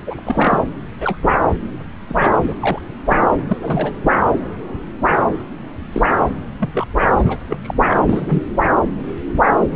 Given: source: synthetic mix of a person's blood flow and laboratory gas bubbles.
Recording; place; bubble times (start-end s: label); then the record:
Doppler ultrasound of blood flow; subclavian vein
0.06-0.60 s: bubbles
1.00-1.18 s: bubbles
1.22-1.53 s: bubbles
2.08-2.38 s: bubbles
2.42-2.54 s: bubbles
2.60-2.79 s: bubbles
3.08-3.16 s: bubbles
3.21-3.40 s: bubbles
3.48-3.58 s: bubbles
3.62-3.97 s: bubbles
5.92-6.02 s: bubbles
6.59-6.70 s: bubbles
6.74-6.86 s: bubbles
7.11-7.38 s: bubbles
7.48-7.57 s: bubbles
7.62-7.74 s: bubbles
7.90-8.42 s: bubbles
9.71-9.76 s: bubbles
From the record:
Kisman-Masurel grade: 232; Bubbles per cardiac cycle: several, 3 to 8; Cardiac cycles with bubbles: 50 to 99%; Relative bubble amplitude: moderate (0.250 to 0.450); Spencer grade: 3 (all of the cardiac periods contain showers or single bubble signals, but not dominating or overriding the cardiac motion signals); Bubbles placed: anywhere in the cardiac cycle